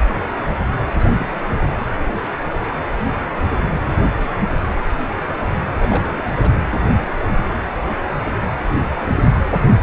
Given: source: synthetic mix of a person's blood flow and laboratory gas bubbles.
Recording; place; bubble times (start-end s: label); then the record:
Doppler ultrasound of blood flow; precordium
0.73-0.84 s: bubbles
0.88-1.29 s: bubbles
5.80-6.32 s: bubbles
6.41-6.67 s: bubbles
From the record:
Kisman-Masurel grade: 221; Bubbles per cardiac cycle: several, 3 to 8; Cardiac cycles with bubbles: 10 to 50%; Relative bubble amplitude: barely perceptible (0.100 to 0.250); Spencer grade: 2 (many but less than half of the cardiac periods contain bubble signals, singularly or in groups); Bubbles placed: anywhere in the cardiac cycle